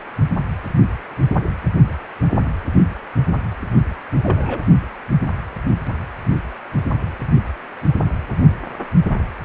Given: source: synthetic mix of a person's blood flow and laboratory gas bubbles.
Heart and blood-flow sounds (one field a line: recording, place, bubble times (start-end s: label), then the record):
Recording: Doppler ultrasound of blood flow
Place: precordium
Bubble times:
4.23-4.61 s: bubbles
From the record:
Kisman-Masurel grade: 112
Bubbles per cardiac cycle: 1 to 2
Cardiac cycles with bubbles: 1 to 10%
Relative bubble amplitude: moderate (0.250 to 0.450)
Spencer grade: 1 (occasional bubble signal discernible with the cardiac motion signal, with majority of cardiac periods free of bubbles)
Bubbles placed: only in the low amplitude regions of the cardiac cycle